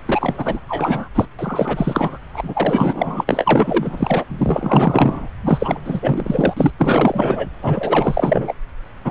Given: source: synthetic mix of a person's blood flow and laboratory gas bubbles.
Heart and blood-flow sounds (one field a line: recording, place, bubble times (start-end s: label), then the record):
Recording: Doppler ultrasound of blood flow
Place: subclavian vein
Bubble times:
0.05-0.59 s: bubbles
0.68-1.08 s: bubbles
1.15-1.25 s: bubbles
1.38-2.18 s: bubbles
2.33-4.24 s: bubbles
4.38-5.28 s: bubbles
5.42-5.80 s: bubbles
5.84-6.53 s: bubbles
6.56-6.71 s: bubbles
6.78-7.47 s: bubbles
7.62-8.54 s: bubbles
9.04-9.10 s: bubbles
From the record:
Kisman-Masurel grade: 444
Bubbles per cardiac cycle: continuous sound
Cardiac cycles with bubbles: 100%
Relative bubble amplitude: maximal (0.775 to 0.999)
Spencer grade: 4 (maximum detectable bubble signal sounding continuously throughout systole and diastole of every cardiac period, and overriding the amplitude of the normal cardiac signals)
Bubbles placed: anywhere in the cardiac cycle